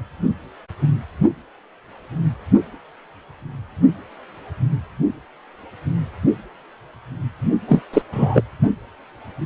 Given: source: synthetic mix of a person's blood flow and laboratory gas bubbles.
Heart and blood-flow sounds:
Doppler ultrasound of blood flow; precordium
7.68-7.83 s: bubbles
7.93-8.02 s: bubbles
8.12-8.44 s: bubbles
From the record:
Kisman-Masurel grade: 213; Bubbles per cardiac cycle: several, 3 to 8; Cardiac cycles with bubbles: 1 to 10%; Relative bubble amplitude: loud (0.450 to 0.775); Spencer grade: 1 (occasional bubble signal discernible with the cardiac motion signal, with majority of cardiac periods free of bubbles); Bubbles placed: only in the low amplitude regions of the cardiac cycle

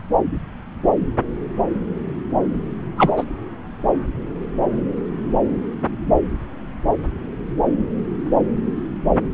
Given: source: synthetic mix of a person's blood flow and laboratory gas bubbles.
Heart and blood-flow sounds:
Doppler ultrasound of blood flow; subclavian vein
2.97-3.10 s: bubbles
3.16-3.24 s: bubbles
From the record:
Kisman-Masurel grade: 123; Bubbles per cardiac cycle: 1 to 2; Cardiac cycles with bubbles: 10 to 50%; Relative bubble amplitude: loud (0.450 to 0.775); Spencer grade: 2 (many but less than half of the cardiac periods contain bubble signals, singularly or in groups); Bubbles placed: anywhere in the cardiac cycle

